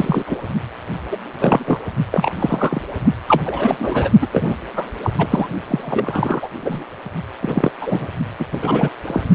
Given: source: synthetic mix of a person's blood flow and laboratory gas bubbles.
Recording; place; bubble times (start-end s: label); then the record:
Doppler ultrasound of blood flow; precordium
0.00-0.23 s: bubbles
0.27-0.37 s: bubbles
1.11-1.17 s: bubbles
1.39-1.79 s: bubbles
2.11-2.81 s: bubbles
3.27-3.42 s: bubbles
3.45-3.75 s: bubbles
3.78-4.10 s: bubbles
4.21-4.27 s: bubbles
4.32-4.54 s: bubbles
4.76-4.85 s: bubbles
5.04-5.12 s: bubbles
5.18-5.27 s: bubbles
5.30-5.47 s: bubbles
5.67-6.48 s: bubbles
6.62-6.84 s: bubbles
7.41-7.71 s: bubbles
7.82-8.07 s: bubbles
8.39-8.45 s: bubbles
8.52-8.60 s: bubbles
8.62-8.89 s: bubbles
9.06-9.21 s: bubbles
From the record:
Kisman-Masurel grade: 243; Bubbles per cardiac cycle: several, 3 to 8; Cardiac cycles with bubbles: 100%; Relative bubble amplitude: loud (0.450 to 0.775); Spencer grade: 3 (all of the cardiac periods contain showers or single bubble signals, but not dominating or overriding the cardiac motion signals); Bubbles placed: only in the low amplitude regions of the cardiac cycle